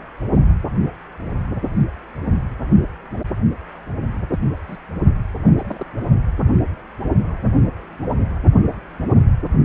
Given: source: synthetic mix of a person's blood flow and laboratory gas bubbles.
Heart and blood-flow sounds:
Doppler ultrasound of blood flow; precordium
4.29-4.40 s: bubbles
4.67-4.77 s: bubbles
5.43-5.85 s: bubbles
8.11-8.17 s: bubbles
From the record:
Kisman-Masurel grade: 121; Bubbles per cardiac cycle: 1 to 2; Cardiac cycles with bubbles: 10 to 50%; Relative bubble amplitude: barely perceptible (0.100 to 0.250); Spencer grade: 2 (many but less than half of the cardiac periods contain bubble signals, singularly or in groups); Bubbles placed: only in the low amplitude regions of the cardiac cycle

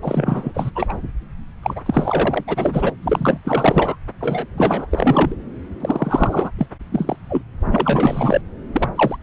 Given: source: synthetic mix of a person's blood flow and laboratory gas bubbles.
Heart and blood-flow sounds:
Doppler ultrasound of blood flow; subclavian vein
0.02-0.52 s: bubbles
0.54-0.71 s: bubbles
0.75-0.94 s: bubbles
1.62-1.82 s: bubbles
1.85-2.44 s: bubbles
2.47-2.93 s: bubbles
3.02-3.38 s: bubbles
3.44-3.96 s: bubbles
4.20-4.46 s: bubbles
4.57-4.87 s: bubbles
4.90-5.35 s: bubbles
5.80-6.51 s: bubbles
6.57-6.68 s: bubbles
6.91-7.16 s: bubbles
7.29-7.42 s: bubbles
7.71-8.41 s: bubbles
8.72-8.89 s: bubbles
8.96-9.16 s: bubbles
From the record:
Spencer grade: 4 (maximum detectable bubble signal sounding continuously throughout systole and diastole of every cardiac period, and overriding the amplitude of the normal cardiac signals); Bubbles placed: anywhere in the cardiac cycle

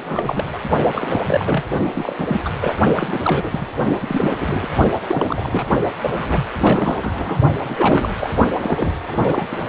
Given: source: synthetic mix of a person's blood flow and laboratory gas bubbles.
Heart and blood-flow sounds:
Doppler ultrasound of blood flow; precordium
0.00-0.44 s: bubbles
0.53-0.57 s: bubbles
0.92-1.64 s: bubbles
1.94-2.42 s: bubbles
2.45-2.50 s: bubbles
2.61-2.73 s: bubbles
2.96-3.19 s: bubbles
3.22-3.67 s: bubbles
4.01-4.75 s: bubbles
5.08-5.66 s: bubbles
6.01-6.44 s: bubbles
6.58-6.99 s: bubbles
7.01-7.38 s: bubbles
7.63-8.14 s: bubbles
8.20-8.30 s: bubbles
8.62-8.93 s: bubbles
9.07-9.47 s: bubbles
9.51-9.57 s: bubbles
From the record:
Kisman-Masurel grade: 342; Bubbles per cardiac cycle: rolling drumbeat, 9 or more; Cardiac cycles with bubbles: 100%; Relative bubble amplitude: moderate (0.250 to 0.450); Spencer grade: 3 (all of the cardiac periods contain showers or single bubble signals, but not dominating or overriding the cardiac motion signals); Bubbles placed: only in the low amplitude regions of the cardiac cycle

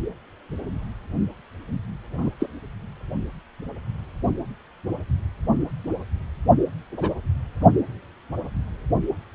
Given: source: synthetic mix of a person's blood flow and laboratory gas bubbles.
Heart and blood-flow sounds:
Doppler ultrasound of blood flow; precordium
2.17-2.30 s: bubbles
2.39-2.46 s: bubbles
6.97-7.14 s: bubbles
From the record:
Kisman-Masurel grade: 122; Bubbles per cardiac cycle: 1 to 2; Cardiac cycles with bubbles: 10 to 50%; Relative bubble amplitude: moderate (0.250 to 0.450); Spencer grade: 2 (many but less than half of the cardiac periods contain bubble signals, singularly or in groups); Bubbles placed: only in the low amplitude regions of the cardiac cycle

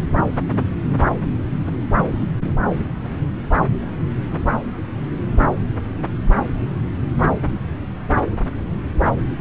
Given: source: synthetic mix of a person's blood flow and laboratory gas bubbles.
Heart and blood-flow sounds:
Doppler ultrasound of blood flow; subclavian vein
no bubbles
From the record:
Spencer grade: 0 (complete lack of bubble signals)

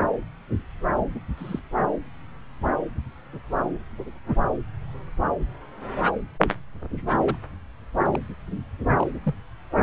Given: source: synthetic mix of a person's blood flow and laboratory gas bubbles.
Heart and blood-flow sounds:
Doppler ultrasound of blood flow; subclavian vein
1.15-1.19 s: bubbles
1.38-1.59 s: bubbles
6.96-7.01 s: bubbles
7.25-7.37 s: bubbles
8.05-8.09 s: bubbles
8.14-8.19 s: bubbles
8.89-9.07 s: bubbles
9.23-9.35 s: bubbles
From the record:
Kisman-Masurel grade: 121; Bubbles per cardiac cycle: 1 to 2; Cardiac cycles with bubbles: 10 to 50%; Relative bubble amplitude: barely perceptible (0.100 to 0.250); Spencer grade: 2 (many but less than half of the cardiac periods contain bubble signals, singularly or in groups); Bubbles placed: anywhere in the cardiac cycle

